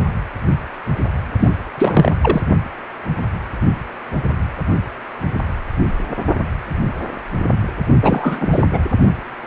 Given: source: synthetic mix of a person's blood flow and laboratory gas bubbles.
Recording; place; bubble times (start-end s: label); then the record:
Doppler ultrasound of blood flow; precordium
1.39-1.49 s: bubbles
1.77-2.15 s: bubbles
2.21-2.42 s: bubbles
8.03-8.48 s: bubbles
8.52-8.63 s: bubbles
8.72-8.79 s: bubbles
From the record:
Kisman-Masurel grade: 223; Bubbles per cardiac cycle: several, 3 to 8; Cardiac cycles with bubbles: 10 to 50%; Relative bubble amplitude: loud (0.450 to 0.775); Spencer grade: 2 (many but less than half of the cardiac periods contain bubble signals, singularly or in groups); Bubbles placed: only in the low amplitude regions of the cardiac cycle